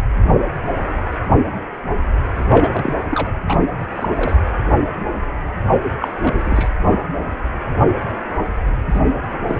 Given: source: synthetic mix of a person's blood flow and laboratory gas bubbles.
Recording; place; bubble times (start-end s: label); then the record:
Doppler ultrasound of blood flow; precordium
2.36-2.93 s: bubbles
3.10-3.28 s: bubbles
3.47-3.64 s: bubbles
3.96-4.09 s: bubbles
4.17-4.36 s: bubbles
6.00-6.68 s: bubbles
8.88-9.00 s: bubbles
9.48-9.59 s: bubbles
From the record:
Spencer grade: 3 (all of the cardiac periods contain showers or single bubble signals, but not dominating or overriding the cardiac motion signals); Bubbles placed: anywhere in the cardiac cycle